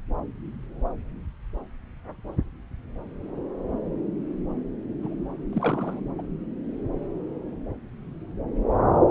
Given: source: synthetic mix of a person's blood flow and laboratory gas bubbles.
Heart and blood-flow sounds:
Doppler ultrasound of blood flow; subclavian vein
5.02-5.14 s: bubbles
5.52-6.00 s: bubbles
6.18-6.22 s: bubbles
From the record:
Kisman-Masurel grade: 211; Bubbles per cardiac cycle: several, 3 to 8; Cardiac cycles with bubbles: 1 to 10%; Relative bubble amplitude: barely perceptible (0.100 to 0.250); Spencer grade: 1 (occasional bubble signal discernible with the cardiac motion signal, with majority of cardiac periods free of bubbles); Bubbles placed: anywhere in the cardiac cycle

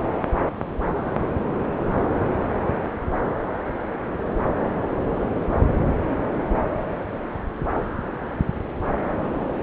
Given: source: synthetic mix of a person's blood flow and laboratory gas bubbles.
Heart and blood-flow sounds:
Doppler ultrasound of blood flow; subclavian vein
7.73-7.89 s: bubbles
From the record:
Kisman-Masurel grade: 111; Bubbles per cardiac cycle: 1 to 2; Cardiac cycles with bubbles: 1 to 10%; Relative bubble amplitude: barely perceptible (0.100 to 0.250); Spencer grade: 1 (occasional bubble signal discernible with the cardiac motion signal, with majority of cardiac periods free of bubbles); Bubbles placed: anywhere in the cardiac cycle

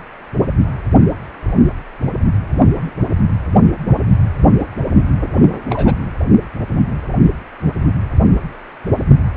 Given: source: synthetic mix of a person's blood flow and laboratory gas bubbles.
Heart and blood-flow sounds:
Doppler ultrasound of blood flow; precordium
5.70-5.95 s: bubbles
From the record:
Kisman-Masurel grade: 112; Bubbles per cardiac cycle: 1 to 2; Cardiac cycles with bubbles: 1 to 10%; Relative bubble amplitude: moderate (0.250 to 0.450); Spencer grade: 1 (occasional bubble signal discernible with the cardiac motion signal, with majority of cardiac periods free of bubbles); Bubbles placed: anywhere in the cardiac cycle

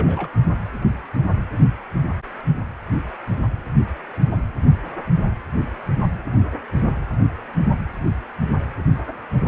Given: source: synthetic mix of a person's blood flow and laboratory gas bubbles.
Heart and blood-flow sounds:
Doppler ultrasound of blood flow; precordium
0.00-0.29 s: bubbles
From the record:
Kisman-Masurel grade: 111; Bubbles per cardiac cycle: 1 to 2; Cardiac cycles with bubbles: 1 to 10%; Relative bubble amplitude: barely perceptible (0.100 to 0.250); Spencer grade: 1 (occasional bubble signal discernible with the cardiac motion signal, with majority of cardiac periods free of bubbles); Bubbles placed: anywhere in the cardiac cycle

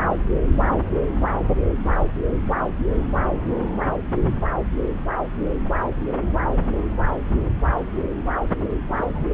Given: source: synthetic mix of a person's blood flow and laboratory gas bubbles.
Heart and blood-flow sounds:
Doppler ultrasound of blood flow; subclavian vein
8.93-9.06 s: bubbles
9.14-9.26 s: bubbles
From the record:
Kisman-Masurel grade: 112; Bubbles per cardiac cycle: 1 to 2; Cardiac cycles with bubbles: 1 to 10%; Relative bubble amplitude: moderate (0.250 to 0.450); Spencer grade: 1 (occasional bubble signal discernible with the cardiac motion signal, with majority of cardiac periods free of bubbles); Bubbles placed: anywhere in the cardiac cycle

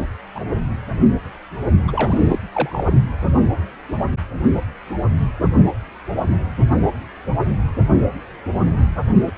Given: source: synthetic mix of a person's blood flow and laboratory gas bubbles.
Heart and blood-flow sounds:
Doppler ultrasound of blood flow; precordium
0.35-0.45 s: bubbles
1.87-2.38 s: bubbles
2.52-2.92 s: bubbles
9.25-9.31 s: bubbles
From the record:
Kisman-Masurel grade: 222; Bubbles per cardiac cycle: several, 3 to 8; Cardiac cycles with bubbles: 10 to 50%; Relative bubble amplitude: moderate (0.250 to 0.450); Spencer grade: 2 (many but less than half of the cardiac periods contain bubble signals, singularly or in groups); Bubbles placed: only in the low amplitude regions of the cardiac cycle

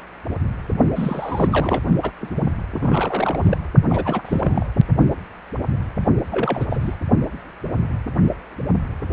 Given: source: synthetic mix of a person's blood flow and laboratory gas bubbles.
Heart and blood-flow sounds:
Doppler ultrasound of blood flow; precordium
0.95-1.85 s: bubbles
2.02-2.11 s: bubbles
2.19-2.49 s: bubbles
2.71-3.57 s: bubbles
3.89-4.22 s: bubbles
4.25-4.70 s: bubbles
6.32-6.67 s: bubbles
6.70-6.96 s: bubbles
From the record:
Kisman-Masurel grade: 332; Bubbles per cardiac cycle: rolling drumbeat, 9 or more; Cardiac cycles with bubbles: 50 to 99%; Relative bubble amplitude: moderate (0.250 to 0.450); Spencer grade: 3 (all of the cardiac periods contain showers or single bubble signals, but not dominating or overriding the cardiac motion signals); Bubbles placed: only in the low amplitude regions of the cardiac cycle

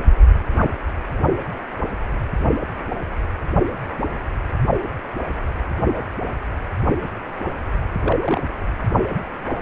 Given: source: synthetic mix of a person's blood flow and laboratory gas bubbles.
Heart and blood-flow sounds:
Doppler ultrasound of blood flow; precordium
7.99-8.16 s: bubbles
8.21-8.41 s: bubbles
From the record:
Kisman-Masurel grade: 112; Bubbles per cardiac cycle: 1 to 2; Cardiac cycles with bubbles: 1 to 10%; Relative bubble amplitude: moderate (0.250 to 0.450); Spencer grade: 1 (occasional bubble signal discernible with the cardiac motion signal, with majority of cardiac periods free of bubbles); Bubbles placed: only in the low amplitude regions of the cardiac cycle

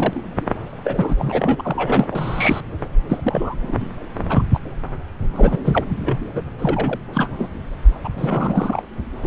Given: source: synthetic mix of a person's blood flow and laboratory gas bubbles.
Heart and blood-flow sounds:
Doppler ultrasound of blood flow; subclavian vein
0.00-0.26 s: bubbles
0.83-2.08 s: bubbles
2.12-2.60 s: bubbles
3.07-3.76 s: bubbles
3.79-3.90 s: bubbles
4.29-4.42 s: bubbles
4.53-4.59 s: bubbles
5.33-5.59 s: bubbles
5.64-5.84 s: bubbles
6.00-6.17 s: bubbles
6.34-6.42 s: bubbles
6.58-7.00 s: bubbles
7.13-7.30 s: bubbles
7.38-7.48 s: bubbles
8.04-8.08 s: bubbles
8.14-8.82 s: bubbles
9.22-9.27 s: bubbles
From the record:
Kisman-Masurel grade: 342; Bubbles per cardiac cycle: rolling drumbeat, 9 or more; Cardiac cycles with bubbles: 100%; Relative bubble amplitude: moderate (0.250 to 0.450); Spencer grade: 3 (all of the cardiac periods contain showers or single bubble signals, but not dominating or overriding the cardiac motion signals); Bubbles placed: anywhere in the cardiac cycle

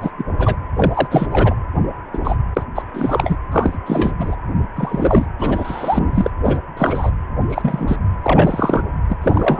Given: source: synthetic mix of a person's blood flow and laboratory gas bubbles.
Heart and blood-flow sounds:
Doppler ultrasound of blood flow; precordium
0.00-0.11 s: bubbles
0.18-0.26 s: bubbles
0.38-0.56 s: bubbles
0.76-1.07 s: bubbles
1.10-1.27 s: bubbles
1.30-1.54 s: bubbles
2.13-2.19 s: bubbles
2.23-2.36 s: bubbles
2.56-2.63 s: bubbles
2.75-2.83 s: bubbles
2.94-3.36 s: bubbles
3.51-3.79 s: bubbles
3.85-4.12 s: bubbles
4.18-4.36 s: bubbles
4.76-5.26 s: bubbles
5.39-6.31 s: bubbles
6.44-6.59 s: bubbles
6.77-7.11 s: bubbles
7.50-7.96 s: bubbles
8.22-8.82 s: bubbles
9.09-9.17 s: bubbles
9.21-9.60 s: bubbles
From the record:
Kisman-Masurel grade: 243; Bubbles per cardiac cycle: several, 3 to 8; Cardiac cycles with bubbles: 100%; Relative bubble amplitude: loud (0.450 to 0.775); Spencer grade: 3 (all of the cardiac periods contain showers or single bubble signals, but not dominating or overriding the cardiac motion signals); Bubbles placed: anywhere in the cardiac cycle

